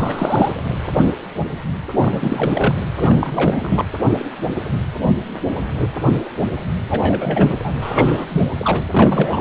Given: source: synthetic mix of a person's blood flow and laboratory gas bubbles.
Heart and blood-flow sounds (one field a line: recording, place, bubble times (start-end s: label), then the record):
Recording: Doppler ultrasound of blood flow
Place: precordium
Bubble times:
0.00-0.55 s: bubbles
1.98-2.75 s: bubbles
2.99-3.85 s: bubbles
6.90-7.58 s: bubbles
7.64-7.72 s: bubbles
7.81-8.25 s: bubbles
8.28-8.42 s: bubbles
8.57-8.82 s: bubbles
8.90-9.41 s: bubbles
From the record:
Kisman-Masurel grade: 333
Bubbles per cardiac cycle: rolling drumbeat, 9 or more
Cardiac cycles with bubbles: 50 to 99%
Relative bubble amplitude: loud (0.450 to 0.775)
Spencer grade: 3 (all of the cardiac periods contain showers or single bubble signals, but not dominating or overriding the cardiac motion signals)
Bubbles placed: anywhere in the cardiac cycle